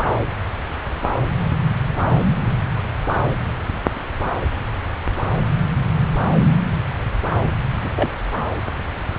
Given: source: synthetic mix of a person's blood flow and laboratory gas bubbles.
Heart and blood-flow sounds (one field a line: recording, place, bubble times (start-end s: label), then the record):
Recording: Doppler ultrasound of blood flow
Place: subclavian vein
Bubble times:
7.82-7.91 s: bubbles
7.95-8.10 s: bubbles
From the record:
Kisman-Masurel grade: 122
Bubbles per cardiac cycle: 1 to 2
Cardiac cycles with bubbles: 10 to 50%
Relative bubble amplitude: moderate (0.250 to 0.450)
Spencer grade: 2 (many but less than half of the cardiac periods contain bubble signals, singularly or in groups)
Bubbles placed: anywhere in the cardiac cycle